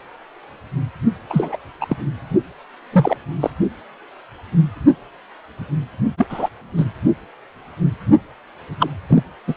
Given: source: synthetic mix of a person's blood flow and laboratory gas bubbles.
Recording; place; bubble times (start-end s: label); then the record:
Doppler ultrasound of blood flow; precordium
1.29-1.56 s: bubbles
1.81-1.86 s: bubbles
1.89-1.96 s: bubbles
2.92-3.17 s: bubbles
3.40-3.50 s: bubbles
6.17-6.26 s: bubbles
6.29-6.49 s: bubbles
6.77-6.84 s: bubbles
8.79-8.90 s: bubbles
9.09-9.22 s: bubbles
9.47-9.54 s: bubbles
From the record:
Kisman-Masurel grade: 223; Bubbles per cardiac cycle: several, 3 to 8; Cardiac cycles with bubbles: 10 to 50%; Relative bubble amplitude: loud (0.450 to 0.775); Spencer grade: 2 (many but less than half of the cardiac periods contain bubble signals, singularly or in groups); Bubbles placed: only in the low amplitude regions of the cardiac cycle